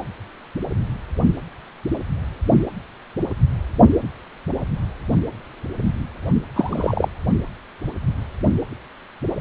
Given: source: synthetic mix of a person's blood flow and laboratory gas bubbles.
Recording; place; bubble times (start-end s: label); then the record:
Doppler ultrasound of blood flow; precordium
6.55-7.08 s: bubbles
From the record:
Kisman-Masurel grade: 123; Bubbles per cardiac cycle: 1 to 2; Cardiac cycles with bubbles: 10 to 50%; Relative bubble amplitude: loud (0.450 to 0.775); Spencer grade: 2 (many but less than half of the cardiac periods contain bubble signals, singularly or in groups); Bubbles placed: only in the low amplitude regions of the cardiac cycle